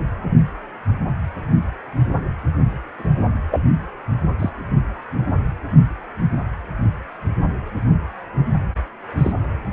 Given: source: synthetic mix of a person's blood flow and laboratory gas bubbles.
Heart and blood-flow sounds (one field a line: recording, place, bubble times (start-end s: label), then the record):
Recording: Doppler ultrasound of blood flow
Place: precordium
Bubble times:
2.99-3.08 s: bubbles
3.51-3.60 s: bubbles
4.39-4.50 s: bubbles
9.17-9.32 s: bubbles
From the record:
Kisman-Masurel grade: 122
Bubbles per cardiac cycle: 1 to 2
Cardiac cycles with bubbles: 10 to 50%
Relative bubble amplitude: moderate (0.250 to 0.450)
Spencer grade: 2 (many but less than half of the cardiac periods contain bubble signals, singularly or in groups)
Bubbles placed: anywhere in the cardiac cycle